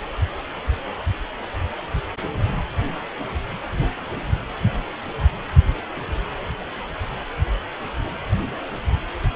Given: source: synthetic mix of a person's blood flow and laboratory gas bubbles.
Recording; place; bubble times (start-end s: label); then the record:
Doppler ultrasound of blood flow; precordium
no bubbles
From the record:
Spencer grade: 0 (complete lack of bubble signals)